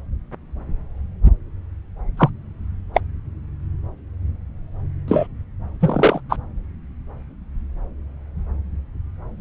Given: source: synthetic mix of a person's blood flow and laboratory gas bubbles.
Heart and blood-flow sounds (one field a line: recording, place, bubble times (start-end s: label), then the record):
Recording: Doppler ultrasound of blood flow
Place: subclavian vein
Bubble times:
2.17-2.30 s: bubbles
2.94-3.01 s: bubbles
5.08-5.27 s: bubbles
5.79-6.21 s: bubbles
6.29-6.36 s: bubbles
From the record:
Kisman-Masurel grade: 123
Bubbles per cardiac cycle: 1 to 2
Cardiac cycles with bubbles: 10 to 50%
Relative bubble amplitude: loud (0.450 to 0.775)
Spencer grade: 2 (many but less than half of the cardiac periods contain bubble signals, singularly or in groups)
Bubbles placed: anywhere in the cardiac cycle